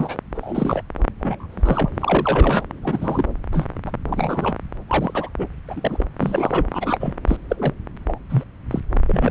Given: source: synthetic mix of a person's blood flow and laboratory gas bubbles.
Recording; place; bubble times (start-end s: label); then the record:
Doppler ultrasound of blood flow; subclavian vein
0.00-0.18 s: bubbles
0.35-0.82 s: bubbles
1.20-1.47 s: bubbles
1.52-2.65 s: bubbles
2.83-3.25 s: bubbles
3.52-3.67 s: bubbles
3.86-3.91 s: bubbles
4.08-4.56 s: bubbles
4.88-5.29 s: bubbles
5.38-5.47 s: bubbles
5.68-6.04 s: bubbles
6.19-6.65 s: bubbles
6.71-7.14 s: bubbles
7.27-7.36 s: bubbles
7.49-7.73 s: bubbles
8.07-8.20 s: bubbles
8.29-8.43 s: bubbles
8.71-8.80 s: bubbles
9.07-9.31 s: bubbles
From the record:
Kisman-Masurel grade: 242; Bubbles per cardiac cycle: several, 3 to 8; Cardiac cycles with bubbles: 100%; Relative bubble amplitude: moderate (0.250 to 0.450); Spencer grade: 3 (all of the cardiac periods contain showers or single bubble signals, but not dominating or overriding the cardiac motion signals); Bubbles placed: anywhere in the cardiac cycle